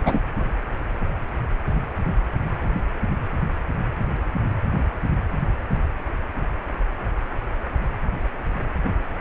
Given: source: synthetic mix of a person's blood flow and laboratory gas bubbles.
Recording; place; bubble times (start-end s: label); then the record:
Doppler ultrasound of blood flow; precordium
0.00-0.02 s: bubbles
0.05-0.19 s: bubbles
From the record:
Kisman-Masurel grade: 213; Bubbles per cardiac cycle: several, 3 to 8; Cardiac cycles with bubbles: 1 to 10%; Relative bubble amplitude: loud (0.450 to 0.775); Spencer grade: 1 (occasional bubble signal discernible with the cardiac motion signal, with majority of cardiac periods free of bubbles); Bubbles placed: anywhere in the cardiac cycle